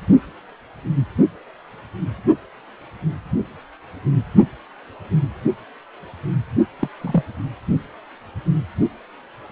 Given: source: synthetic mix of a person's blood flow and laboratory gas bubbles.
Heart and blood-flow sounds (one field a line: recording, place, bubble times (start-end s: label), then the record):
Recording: Doppler ultrasound of blood flow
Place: precordium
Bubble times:
6.79-6.88 s: bubbles
7.01-7.24 s: bubbles
From the record:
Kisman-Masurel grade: 112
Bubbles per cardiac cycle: 1 to 2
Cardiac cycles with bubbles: 1 to 10%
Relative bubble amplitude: moderate (0.250 to 0.450)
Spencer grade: 1 (occasional bubble signal discernible with the cardiac motion signal, with majority of cardiac periods free of bubbles)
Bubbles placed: only in the low amplitude regions of the cardiac cycle